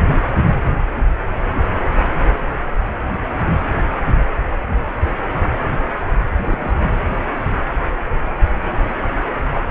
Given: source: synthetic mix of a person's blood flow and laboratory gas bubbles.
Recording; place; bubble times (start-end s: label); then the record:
Doppler ultrasound of blood flow; precordium
6.37-6.75 s: bubbles
From the record:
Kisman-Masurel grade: 211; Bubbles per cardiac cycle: several, 3 to 8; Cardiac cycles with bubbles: 1 to 10%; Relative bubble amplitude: barely perceptible (0.100 to 0.250); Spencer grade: 1 (occasional bubble signal discernible with the cardiac motion signal, with majority of cardiac periods free of bubbles); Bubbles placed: anywhere in the cardiac cycle